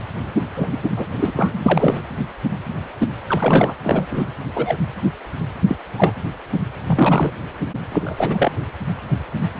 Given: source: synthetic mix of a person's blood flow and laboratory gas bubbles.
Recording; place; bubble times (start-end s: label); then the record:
Doppler ultrasound of blood flow; precordium
0.00-0.02 s: bubbles
0.55-0.68 s: bubbles
0.71-0.79 s: bubbles
0.83-0.90 s: bubbles
0.96-1.07 s: bubbles
1.18-1.33 s: bubbles
1.36-1.60 s: bubbles
1.66-2.01 s: bubbles
3.27-3.74 s: bubbles
3.84-4.06 s: bubbles
4.10-4.27 s: bubbles
4.54-4.78 s: bubbles
5.67-5.75 s: bubbles
5.97-6.14 s: bubbles
6.86-7.31 s: bubbles
7.92-8.52 s: bubbles
From the record:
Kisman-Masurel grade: 233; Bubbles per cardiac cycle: several, 3 to 8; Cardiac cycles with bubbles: 50 to 99%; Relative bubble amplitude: loud (0.450 to 0.775); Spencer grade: 3 (all of the cardiac periods contain showers or single bubble signals, but not dominating or overriding the cardiac motion signals); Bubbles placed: anywhere in the cardiac cycle